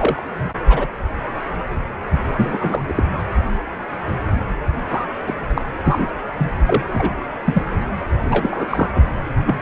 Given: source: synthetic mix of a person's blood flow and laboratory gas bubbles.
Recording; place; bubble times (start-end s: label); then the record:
Doppler ultrasound of blood flow; precordium
0.00-0.22 s: bubbles
0.68-0.87 s: bubbles
2.37-2.82 s: bubbles
2.88-2.93 s: bubbles
2.96-3.04 s: bubbles
4.88-5.06 s: bubbles
5.26-5.35 s: bubbles
5.55-5.62 s: bubbles
5.85-6.10 s: bubbles
6.38-6.52 s: bubbles
6.67-6.84 s: bubbles
6.93-7.15 s: bubbles
7.45-7.62 s: bubbles
8.25-8.67 s: bubbles
8.70-8.88 s: bubbles
8.95-9.03 s: bubbles
9.46-9.62 s: bubbles
From the record:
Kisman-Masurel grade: 232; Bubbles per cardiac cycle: several, 3 to 8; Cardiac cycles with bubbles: 50 to 99%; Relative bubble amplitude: moderate (0.250 to 0.450); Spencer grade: 3 (all of the cardiac periods contain showers or single bubble signals, but not dominating or overriding the cardiac motion signals); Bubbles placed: anywhere in the cardiac cycle